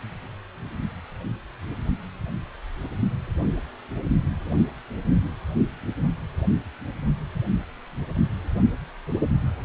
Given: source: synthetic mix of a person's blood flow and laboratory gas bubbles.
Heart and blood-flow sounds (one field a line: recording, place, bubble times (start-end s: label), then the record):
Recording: Doppler ultrasound of blood flow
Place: precordium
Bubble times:
no bubbles
From the record:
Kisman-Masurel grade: 000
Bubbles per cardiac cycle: 0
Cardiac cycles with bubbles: 0%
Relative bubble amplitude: no bubbles discernible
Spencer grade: 0 (complete lack of bubble signals)